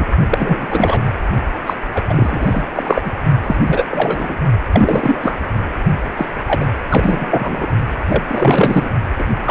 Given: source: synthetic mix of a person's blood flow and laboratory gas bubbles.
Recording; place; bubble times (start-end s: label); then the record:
Doppler ultrasound of blood flow; precordium
0.00-0.06 s: bubbles
0.29-0.66 s: bubbles
0.70-1.03 s: bubbles
1.66-1.74 s: bubbles
1.95-2.05 s: bubbles
2.09-2.73 s: bubbles
2.75-3.13 s: bubbles
3.42-3.57 s: bubbles
3.67-3.85 s: bubbles
3.90-4.37 s: bubbles
4.72-5.38 s: bubbles
6.17-6.27 s: bubbles
6.47-6.66 s: bubbles
6.90-7.66 s: bubbles
8.08-8.22 s: bubbles
8.28-8.89 s: bubbles
9.17-9.24 s: bubbles
9.44-9.51 s: bubbles
From the record:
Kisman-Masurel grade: 343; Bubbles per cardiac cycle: rolling drumbeat, 9 or more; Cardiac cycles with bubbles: 100%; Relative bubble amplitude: loud (0.450 to 0.775); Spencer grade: 3 (all of the cardiac periods contain showers or single bubble signals, but not dominating or overriding the cardiac motion signals); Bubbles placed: only in the low amplitude regions of the cardiac cycle